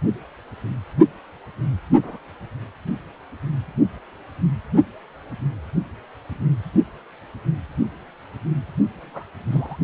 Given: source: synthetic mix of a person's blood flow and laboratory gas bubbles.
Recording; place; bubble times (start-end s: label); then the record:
Doppler ultrasound of blood flow; precordium
2.03-2.19 s: bubbles
8.99-9.25 s: bubbles
9.51-9.76 s: bubbles
From the record:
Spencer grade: 2 (many but less than half of the cardiac periods contain bubble signals, singularly or in groups); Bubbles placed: only in the low amplitude regions of the cardiac cycle